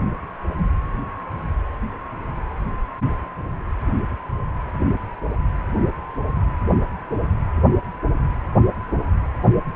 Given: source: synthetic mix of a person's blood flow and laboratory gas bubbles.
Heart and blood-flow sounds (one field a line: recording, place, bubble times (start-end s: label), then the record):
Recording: Doppler ultrasound of blood flow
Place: precordium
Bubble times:
no bubbles
From the record:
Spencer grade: 0 (complete lack of bubble signals)